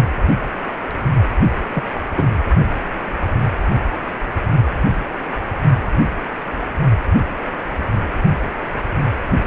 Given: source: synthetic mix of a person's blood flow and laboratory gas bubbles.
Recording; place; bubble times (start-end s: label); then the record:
Doppler ultrasound of blood flow; precordium
1.73-1.83 s: bubbles
2.15-2.28 s: bubbles
From the record:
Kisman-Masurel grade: 112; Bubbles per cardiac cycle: 1 to 2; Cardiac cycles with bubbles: 1 to 10%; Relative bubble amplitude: moderate (0.250 to 0.450); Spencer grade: 1 (occasional bubble signal discernible with the cardiac motion signal, with majority of cardiac periods free of bubbles); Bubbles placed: only in the low amplitude regions of the cardiac cycle